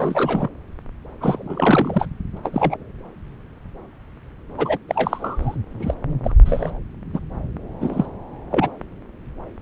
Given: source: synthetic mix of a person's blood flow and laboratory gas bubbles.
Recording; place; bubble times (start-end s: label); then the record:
Doppler ultrasound of blood flow; subclavian vein
0.00-0.48 s: bubbles
1.21-2.06 s: bubbles
2.36-2.38 s: bubbles
2.44-2.77 s: bubbles
4.57-4.78 s: bubbles
4.88-5.55 s: bubbles
5.79-5.95 s: bubbles
6.24-6.34 s: bubbles
6.45-6.79 s: bubbles
7.13-7.20 s: bubbles
7.80-8.07 s: bubbles
8.51-8.69 s: bubbles
From the record:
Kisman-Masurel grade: 232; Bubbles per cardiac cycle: several, 3 to 8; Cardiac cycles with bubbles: 50 to 99%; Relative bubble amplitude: moderate (0.250 to 0.450); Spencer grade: 3 (all of the cardiac periods contain showers or single bubble signals, but not dominating or overriding the cardiac motion signals); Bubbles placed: anywhere in the cardiac cycle